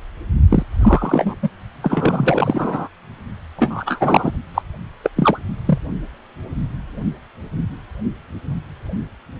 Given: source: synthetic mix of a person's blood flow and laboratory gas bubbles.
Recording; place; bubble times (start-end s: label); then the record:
Doppler ultrasound of blood flow; precordium
0.50-0.62 s: bubbles
0.79-1.35 s: bubbles
1.42-1.49 s: bubbles
1.82-2.88 s: bubbles
3.56-4.31 s: bubbles
4.54-4.62 s: bubbles
5.04-5.09 s: bubbles
5.16-5.40 s: bubbles
5.66-5.79 s: bubbles
From the record:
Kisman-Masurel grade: 233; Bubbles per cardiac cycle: several, 3 to 8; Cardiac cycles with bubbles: 50 to 99%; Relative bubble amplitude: loud (0.450 to 0.775); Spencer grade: 3 (all of the cardiac periods contain showers or single bubble signals, but not dominating or overriding the cardiac motion signals); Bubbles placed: only in the low amplitude regions of the cardiac cycle